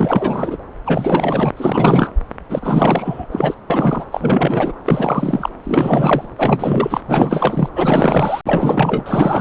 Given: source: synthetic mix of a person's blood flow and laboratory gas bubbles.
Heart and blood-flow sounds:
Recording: Doppler ultrasound of blood flow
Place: subclavian vein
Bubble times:
0.00-0.57 s: bubbles
0.85-1.50 s: bubbles
1.57-2.13 s: bubbles
2.50-3.27 s: bubbles
3.31-3.54 s: bubbles
3.70-4.05 s: bubbles
4.11-4.72 s: bubbles
4.84-5.49 s: bubbles
5.63-6.27 s: bubbles
6.36-7.00 s: bubbles
7.07-7.69 s: bubbles
7.74-8.41 s: bubbles
8.46-9.41 s: bubbles
From the record:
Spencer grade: 4 (maximum detectable bubble signal sounding continuously throughout systole and diastole of every cardiac period, and overriding the amplitude of the normal cardiac signals)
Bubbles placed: anywhere in the cardiac cycle

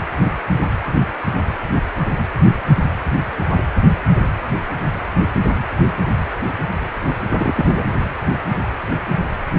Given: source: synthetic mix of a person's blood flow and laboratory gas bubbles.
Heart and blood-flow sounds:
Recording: Doppler ultrasound of blood flow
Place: precordium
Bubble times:
7.28-7.85 s: bubbles
From the record:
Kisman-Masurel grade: 212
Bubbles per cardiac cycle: several, 3 to 8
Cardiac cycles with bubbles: 1 to 10%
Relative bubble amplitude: moderate (0.250 to 0.450)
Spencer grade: 1 (occasional bubble signal discernible with the cardiac motion signal, with majority of cardiac periods free of bubbles)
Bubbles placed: anywhere in the cardiac cycle

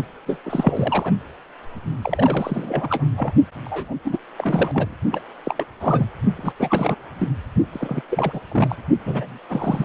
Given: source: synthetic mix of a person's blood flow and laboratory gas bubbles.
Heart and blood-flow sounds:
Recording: Doppler ultrasound of blood flow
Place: precordium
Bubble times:
0.27-0.39 s: bubbles
0.45-1.12 s: bubbles
2.02-3.04 s: bubbles
3.17-3.32 s: bubbles
3.65-3.95 s: bubbles
4.04-4.18 s: bubbles
4.38-4.95 s: bubbles
5.12-5.20 s: bubbles
5.44-5.66 s: bubbles
5.80-6.06 s: bubbles
6.36-6.53 s: bubbles
6.60-6.96 s: bubbles
7.18-7.29 s: bubbles
7.73-8.02 s: bubbles
8.11-8.40 s: bubbles
8.52-8.76 s: bubbles
9.05-9.38 s: bubbles
9.49-9.84 s: bubbles
From the record:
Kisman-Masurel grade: 342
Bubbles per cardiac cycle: rolling drumbeat, 9 or more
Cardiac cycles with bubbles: 100%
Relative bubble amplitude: moderate (0.250 to 0.450)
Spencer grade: 3 (all of the cardiac periods contain showers or single bubble signals, but not dominating or overriding the cardiac motion signals)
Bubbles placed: only in the low amplitude regions of the cardiac cycle

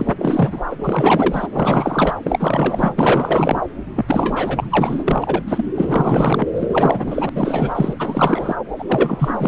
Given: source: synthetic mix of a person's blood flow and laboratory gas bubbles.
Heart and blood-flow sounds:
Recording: Doppler ultrasound of blood flow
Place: subclavian vein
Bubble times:
0.00-0.14 s: bubbles
0.19-0.62 s: bubbles
0.70-0.76 s: bubbles
0.79-1.47 s: bubbles
1.52-2.15 s: bubbles
2.23-3.61 s: bubbles
3.95-5.04 s: bubbles
5.07-5.42 s: bubbles
5.47-5.65 s: bubbles
5.74-6.46 s: bubbles
6.54-7.29 s: bubbles
7.35-7.95 s: bubbles
7.98-8.55 s: bubbles
8.79-8.85 s: bubbles
8.88-9.48 s: bubbles
From the record:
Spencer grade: 4 (maximum detectable bubble signal sounding continuously throughout systole and diastole of every cardiac period, and overriding the amplitude of the normal cardiac signals)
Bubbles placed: anywhere in the cardiac cycle

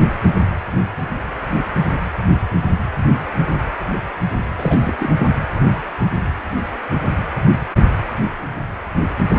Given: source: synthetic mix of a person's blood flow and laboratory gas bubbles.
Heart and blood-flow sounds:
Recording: Doppler ultrasound of blood flow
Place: precordium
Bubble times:
4.58-4.93 s: bubbles
4.99-5.10 s: bubbles
From the record:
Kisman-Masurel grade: 212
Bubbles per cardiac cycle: several, 3 to 8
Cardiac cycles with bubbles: 1 to 10%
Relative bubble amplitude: moderate (0.250 to 0.450)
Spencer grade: 1 (occasional bubble signal discernible with the cardiac motion signal, with majority of cardiac periods free of bubbles)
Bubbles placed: anywhere in the cardiac cycle

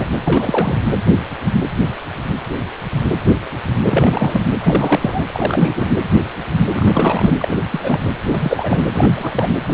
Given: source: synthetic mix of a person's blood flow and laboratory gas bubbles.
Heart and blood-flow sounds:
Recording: Doppler ultrasound of blood flow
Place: precordium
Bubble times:
0.00-0.05 s: bubbles
0.24-0.79 s: bubbles
3.85-4.41 s: bubbles
4.63-5.24 s: bubbles
5.28-5.87 s: bubbles
6.74-7.65 s: bubbles
7.71-8.06 s: bubbles
8.27-8.83 s: bubbles
8.94-9.54 s: bubbles
9.68-9.74 s: bubbles
From the record:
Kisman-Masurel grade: 332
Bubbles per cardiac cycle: rolling drumbeat, 9 or more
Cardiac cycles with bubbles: 50 to 99%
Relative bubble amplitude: moderate (0.250 to 0.450)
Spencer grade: 3 (all of the cardiac periods contain showers or single bubble signals, but not dominating or overriding the cardiac motion signals)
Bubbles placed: anywhere in the cardiac cycle

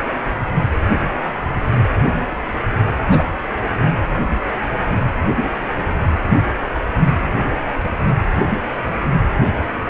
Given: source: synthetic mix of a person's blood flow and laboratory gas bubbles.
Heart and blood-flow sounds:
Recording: Doppler ultrasound of blood flow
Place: precordium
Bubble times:
3.09-3.26 s: bubbles
From the record:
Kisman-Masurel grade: 112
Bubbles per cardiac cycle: 1 to 2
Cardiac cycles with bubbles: 1 to 10%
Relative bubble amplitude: moderate (0.250 to 0.450)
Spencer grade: 1 (occasional bubble signal discernible with the cardiac motion signal, with majority of cardiac periods free of bubbles)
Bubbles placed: anywhere in the cardiac cycle

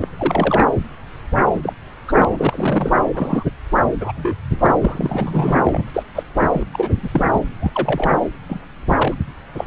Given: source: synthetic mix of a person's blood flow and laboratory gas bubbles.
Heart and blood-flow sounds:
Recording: Doppler ultrasound of blood flow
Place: subclavian vein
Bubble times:
0.02-0.08 s: bubbles
0.17-0.66 s: bubbles
1.52-1.73 s: bubbles
2.08-2.12 s: bubbles
2.17-2.25 s: bubbles
2.27-2.91 s: bubbles
3.13-3.44 s: bubbles
4.00-4.12 s: bubbles
4.17-4.33 s: bubbles
4.58-4.78 s: bubbles
4.81-5.58 s: bubbles
5.64-5.89 s: bubbles
5.94-6.03 s: bubbles
6.15-6.23 s: bubbles
6.52-6.65 s: bubbles
6.73-6.91 s: bubbles
7.03-7.25 s: bubbles
7.33-7.40 s: bubbles
7.61-8.12 s: bubbles
8.49-8.60 s: bubbles
8.89-9.14 s: bubbles
9.57-9.67 s: bubbles
From the record:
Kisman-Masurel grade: 242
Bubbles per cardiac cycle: several, 3 to 8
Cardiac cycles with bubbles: 100%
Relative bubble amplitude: moderate (0.250 to 0.450)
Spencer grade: 3 (all of the cardiac periods contain showers or single bubble signals, but not dominating or overriding the cardiac motion signals)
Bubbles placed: anywhere in the cardiac cycle

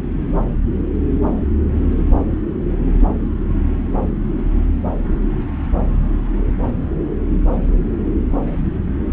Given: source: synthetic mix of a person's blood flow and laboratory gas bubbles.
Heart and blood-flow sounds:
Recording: Doppler ultrasound of blood flow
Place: subclavian vein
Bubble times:
8.37-8.48 s: bubbles
From the record:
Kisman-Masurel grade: 111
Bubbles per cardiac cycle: 1 to 2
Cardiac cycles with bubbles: 1 to 10%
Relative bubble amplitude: barely perceptible (0.100 to 0.250)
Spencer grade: 1 (occasional bubble signal discernible with the cardiac motion signal, with majority of cardiac periods free of bubbles)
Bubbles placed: anywhere in the cardiac cycle

